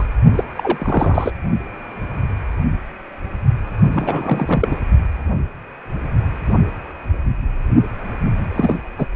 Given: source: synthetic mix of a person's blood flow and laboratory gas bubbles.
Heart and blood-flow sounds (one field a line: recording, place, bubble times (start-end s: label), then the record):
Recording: Doppler ultrasound of blood flow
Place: precordium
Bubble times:
0.00-0.06 s: bubbles
0.35-0.44 s: bubbles
0.56-1.32 s: bubbles
3.94-4.77 s: bubbles
8.47-8.76 s: bubbles
8.98-9.06 s: bubbles
From the record:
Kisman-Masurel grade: 223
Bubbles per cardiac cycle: several, 3 to 8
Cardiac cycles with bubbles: 10 to 50%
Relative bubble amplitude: loud (0.450 to 0.775)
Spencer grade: 2 (many but less than half of the cardiac periods contain bubble signals, singularly or in groups)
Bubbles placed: only in the low amplitude regions of the cardiac cycle